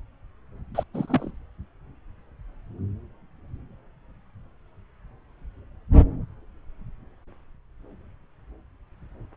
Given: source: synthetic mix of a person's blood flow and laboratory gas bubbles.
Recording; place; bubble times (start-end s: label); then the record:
Doppler ultrasound of blood flow; subclavian vein
0.75-0.83 s: bubbles
0.94-1.31 s: bubbles
From the record:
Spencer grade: 1 (occasional bubble signal discernible with the cardiac motion signal, with majority of cardiac periods free of bubbles); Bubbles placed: anywhere in the cardiac cycle